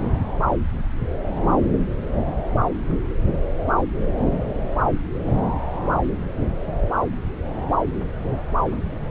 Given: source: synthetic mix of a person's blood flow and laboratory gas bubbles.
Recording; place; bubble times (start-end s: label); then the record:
Doppler ultrasound of blood flow; subclavian vein
no bubbles
From the record:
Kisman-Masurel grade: 000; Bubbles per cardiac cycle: 0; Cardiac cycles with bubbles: 0%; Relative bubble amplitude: no bubbles discernible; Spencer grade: 0 (complete lack of bubble signals)